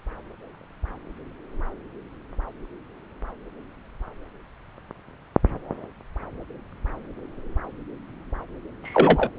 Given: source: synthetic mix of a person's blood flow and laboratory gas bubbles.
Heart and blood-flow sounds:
Doppler ultrasound of blood flow; subclavian vein
8.83-9.30 s: bubbles
From the record:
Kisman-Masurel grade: 123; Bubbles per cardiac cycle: 1 to 2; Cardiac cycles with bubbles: 10 to 50%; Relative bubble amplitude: loud (0.450 to 0.775); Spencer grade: 2 (many but less than half of the cardiac periods contain bubble signals, singularly or in groups); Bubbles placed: anywhere in the cardiac cycle

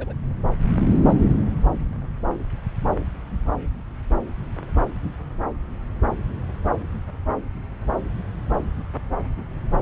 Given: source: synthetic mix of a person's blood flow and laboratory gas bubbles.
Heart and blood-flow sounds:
Doppler ultrasound of blood flow; subclavian vein
0.00-0.13 s: bubbles
From the record:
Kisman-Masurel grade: 221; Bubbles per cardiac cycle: several, 3 to 8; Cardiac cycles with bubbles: 10 to 50%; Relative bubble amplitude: barely perceptible (0.100 to 0.250); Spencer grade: 2 (many but less than half of the cardiac periods contain bubble signals, singularly or in groups); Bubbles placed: anywhere in the cardiac cycle

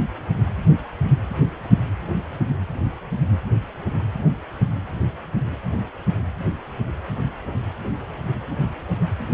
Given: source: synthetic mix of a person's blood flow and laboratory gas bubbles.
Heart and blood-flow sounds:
Doppler ultrasound of blood flow; precordium
no bubbles
From the record:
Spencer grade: 0 (complete lack of bubble signals)

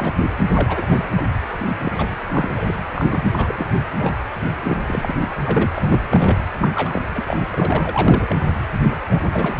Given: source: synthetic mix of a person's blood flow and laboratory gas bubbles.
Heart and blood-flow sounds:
Doppler ultrasound of blood flow; precordium
0.00-0.14 s: bubbles
0.53-0.96 s: bubbles
1.17-1.23 s: bubbles
1.66-1.77 s: bubbles
1.83-2.16 s: bubbles
2.31-2.74 s: bubbles
2.95-3.67 s: bubbles
3.98-4.14 s: bubbles
4.63-4.77 s: bubbles
4.86-5.15 s: bubbles
5.21-5.30 s: bubbles
5.43-5.70 s: bubbles
5.75-6.00 s: bubbles
6.09-6.37 s: bubbles
6.61-6.68 s: bubbles
6.75-7.02 s: bubbles
7.13-7.41 s: bubbles
7.54-8.36 s: bubbles
8.90-8.95 s: bubbles
9.09-9.60 s: bubbles
From the record:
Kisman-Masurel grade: 342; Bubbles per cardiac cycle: rolling drumbeat, 9 or more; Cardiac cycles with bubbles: 100%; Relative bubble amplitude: moderate (0.250 to 0.450); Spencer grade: 3 (all of the cardiac periods contain showers or single bubble signals, but not dominating or overriding the cardiac motion signals); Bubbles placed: anywhere in the cardiac cycle

